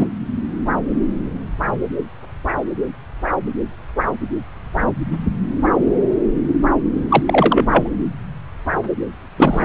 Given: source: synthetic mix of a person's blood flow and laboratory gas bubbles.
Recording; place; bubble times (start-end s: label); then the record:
Doppler ultrasound of blood flow; subclavian vein
0.00-0.06 s: bubbles
7.08-7.22 s: bubbles
7.25-7.65 s: bubbles
7.71-7.88 s: bubbles
9.37-9.65 s: bubbles
From the record:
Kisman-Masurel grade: 223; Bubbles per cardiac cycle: several, 3 to 8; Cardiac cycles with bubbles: 10 to 50%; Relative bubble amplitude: loud (0.450 to 0.775); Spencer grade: 2 (many but less than half of the cardiac periods contain bubble signals, singularly or in groups); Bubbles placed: anywhere in the cardiac cycle